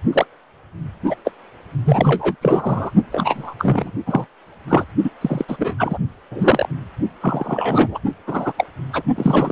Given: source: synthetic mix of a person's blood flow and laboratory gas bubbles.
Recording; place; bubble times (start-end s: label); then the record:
Doppler ultrasound of blood flow; precordium
0.12-0.26 s: bubbles
1.06-1.15 s: bubbles
1.25-1.31 s: bubbles
1.85-2.35 s: bubbles
2.41-2.92 s: bubbles
3.12-3.55 s: bubbles
3.59-3.91 s: bubbles
4.06-4.26 s: bubbles
4.68-4.85 s: bubbles
5.04-5.10 s: bubbles
5.21-5.45 s: bubbles
5.48-5.74 s: bubbles
5.79-5.98 s: bubbles
6.30-6.69 s: bubbles
7.21-7.98 s: bubbles
8.27-8.53 s: bubbles
8.57-8.64 s: bubbles
8.92-9.03 s: bubbles
9.15-9.52 s: bubbles
From the record:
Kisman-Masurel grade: 243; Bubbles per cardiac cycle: several, 3 to 8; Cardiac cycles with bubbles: 100%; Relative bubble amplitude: loud (0.450 to 0.775); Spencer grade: 3 (all of the cardiac periods contain showers or single bubble signals, but not dominating or overriding the cardiac motion signals); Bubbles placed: only in the low amplitude regions of the cardiac cycle